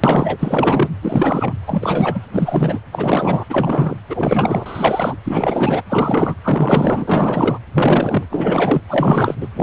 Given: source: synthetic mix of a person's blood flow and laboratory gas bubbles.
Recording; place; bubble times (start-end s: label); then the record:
Doppler ultrasound of blood flow; precordium
0.04-0.88 s: bubbles
1.02-1.54 s: bubbles
1.67-2.21 s: bubbles
2.33-2.79 s: bubbles
2.92-3.46 s: bubbles
3.49-3.95 s: bubbles
4.09-5.16 s: bubbles
5.25-5.83 s: bubbles
5.90-6.34 s: bubbles
6.44-7.58 s: bubbles
7.74-8.26 s: bubbles
8.29-8.81 s: bubbles
8.88-9.34 s: bubbles
9.40-9.48 s: bubbles
9.55-9.63 s: bubbles
From the record:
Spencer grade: 4 (maximum detectable bubble signal sounding continuously throughout systole and diastole of every cardiac period, and overriding the amplitude of the normal cardiac signals); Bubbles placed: anywhere in the cardiac cycle